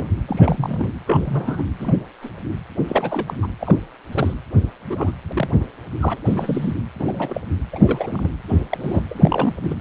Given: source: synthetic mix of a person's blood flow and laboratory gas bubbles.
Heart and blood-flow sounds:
Doppler ultrasound of blood flow; precordium
0.00-0.09 s: bubbles
0.28-0.89 s: bubbles
1.07-1.64 s: bubbles
1.79-1.94 s: bubbles
2.22-2.30 s: bubbles
2.88-3.35 s: bubbles
3.42-3.47 s: bubbles
3.60-3.77 s: bubbles
4.12-4.34 s: bubbles
4.90-5.12 s: bubbles
5.33-5.64 s: bubbles
6.00-6.19 s: bubbles
6.25-6.74 s: bubbles
6.99-7.41 s: bubbles
7.72-8.29 s: bubbles
8.48-8.59 s: bubbles
8.71-9.03 s: bubbles
9.10-9.52 s: bubbles
9.61-9.74 s: bubbles
From the record:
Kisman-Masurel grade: 242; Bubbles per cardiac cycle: several, 3 to 8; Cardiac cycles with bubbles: 100%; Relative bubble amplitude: moderate (0.250 to 0.450); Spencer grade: 3 (all of the cardiac periods contain showers or single bubble signals, but not dominating or overriding the cardiac motion signals); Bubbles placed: anywhere in the cardiac cycle

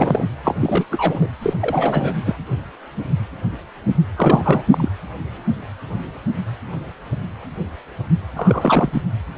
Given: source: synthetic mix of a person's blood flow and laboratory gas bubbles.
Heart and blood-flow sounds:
Doppler ultrasound of blood flow; precordium
0.00-0.27 s: bubbles
0.44-0.55 s: bubbles
0.60-0.84 s: bubbles
0.91-1.27 s: bubbles
1.42-1.53 s: bubbles
1.60-2.16 s: bubbles
2.25-2.35 s: bubbles
4.16-4.62 s: bubbles
4.71-4.88 s: bubbles
8.36-8.90 s: bubbles
8.93-9.02 s: bubbles
From the record:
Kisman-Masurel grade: 333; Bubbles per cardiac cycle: rolling drumbeat, 9 or more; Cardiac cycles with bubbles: 50 to 99%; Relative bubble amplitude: loud (0.450 to 0.775); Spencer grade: 3 (all of the cardiac periods contain showers or single bubble signals, but not dominating or overriding the cardiac motion signals); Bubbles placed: anywhere in the cardiac cycle

